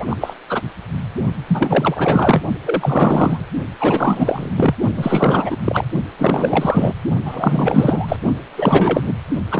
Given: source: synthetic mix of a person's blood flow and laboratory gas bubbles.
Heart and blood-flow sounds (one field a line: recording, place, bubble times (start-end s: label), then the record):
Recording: Doppler ultrasound of blood flow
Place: precordium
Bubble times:
0.00-0.07 s: bubbles
0.09-0.16 s: bubbles
0.20-0.33 s: bubbles
0.48-0.61 s: bubbles
1.47-2.44 s: bubbles
2.65-3.45 s: bubbles
3.80-4.50 s: bubbles
4.57-4.75 s: bubbles
4.96-5.57 s: bubbles
5.64-5.84 s: bubbles
6.18-6.92 s: bubbles
7.25-8.16 s: bubbles
8.57-9.13 s: bubbles
9.51-9.60 s: bubbles
From the record:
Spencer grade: 4 (maximum detectable bubble signal sounding continuously throughout systole and diastole of every cardiac period, and overriding the amplitude of the normal cardiac signals)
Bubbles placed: only in the low amplitude regions of the cardiac cycle